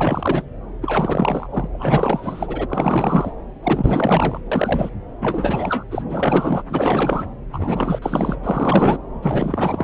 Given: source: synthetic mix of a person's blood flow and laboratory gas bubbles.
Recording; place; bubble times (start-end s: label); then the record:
Doppler ultrasound of blood flow; subclavian vein
0.00-0.43 s: bubbles
0.81-1.47 s: bubbles
1.49-1.68 s: bubbles
1.72-2.67 s: bubbles
2.70-3.34 s: bubbles
3.63-4.42 s: bubbles
4.52-4.90 s: bubbles
5.21-5.85 s: bubbles
5.91-6.03 s: bubbles
6.10-6.62 s: bubbles
6.69-7.24 s: bubbles
7.52-7.99 s: bubbles
8.02-8.36 s: bubbles
8.43-8.98 s: bubbles
9.22-9.84 s: bubbles
From the record:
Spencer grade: 4 (maximum detectable bubble signal sounding continuously throughout systole and diastole of every cardiac period, and overriding the amplitude of the normal cardiac signals); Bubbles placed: anywhere in the cardiac cycle